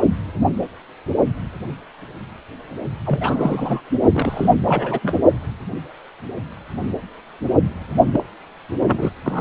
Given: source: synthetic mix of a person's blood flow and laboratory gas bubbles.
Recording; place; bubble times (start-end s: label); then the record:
Doppler ultrasound of blood flow; precordium
0.00-0.02 s: bubbles
3.06-3.81 s: bubbles
4.12-4.54 s: bubbles
4.64-4.99 s: bubbles
5.02-5.19 s: bubbles
8.12-8.23 s: bubbles
8.80-9.11 s: bubbles
9.24-9.41 s: bubbles
From the record:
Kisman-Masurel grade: 332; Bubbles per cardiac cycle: rolling drumbeat, 9 or more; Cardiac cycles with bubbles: 50 to 99%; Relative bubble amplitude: moderate (0.250 to 0.450); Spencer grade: 3 (all of the cardiac periods contain showers or single bubble signals, but not dominating or overriding the cardiac motion signals); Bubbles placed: only in the low amplitude regions of the cardiac cycle